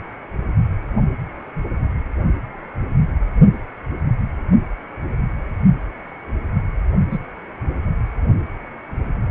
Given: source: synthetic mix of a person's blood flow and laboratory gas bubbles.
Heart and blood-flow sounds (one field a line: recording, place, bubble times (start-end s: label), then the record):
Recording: Doppler ultrasound of blood flow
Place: precordium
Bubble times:
7.11-7.20 s: bubbles
From the record:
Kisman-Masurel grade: 123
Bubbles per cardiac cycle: 1 to 2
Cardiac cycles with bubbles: 10 to 50%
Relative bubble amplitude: loud (0.450 to 0.775)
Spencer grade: 2 (many but less than half of the cardiac periods contain bubble signals, singularly or in groups)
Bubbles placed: only in the low amplitude regions of the cardiac cycle